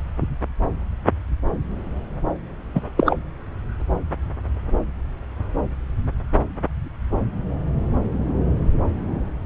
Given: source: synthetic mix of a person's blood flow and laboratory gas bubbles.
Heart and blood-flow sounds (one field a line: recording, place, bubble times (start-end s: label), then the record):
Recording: Doppler ultrasound of blood flow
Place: subclavian vein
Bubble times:
2.75-2.80 s: bubbles
2.96-3.15 s: bubbles
From the record:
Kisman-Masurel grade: 113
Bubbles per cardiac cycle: 1 to 2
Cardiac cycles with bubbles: 1 to 10%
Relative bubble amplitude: loud (0.450 to 0.775)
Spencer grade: 1 (occasional bubble signal discernible with the cardiac motion signal, with majority of cardiac periods free of bubbles)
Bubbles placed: anywhere in the cardiac cycle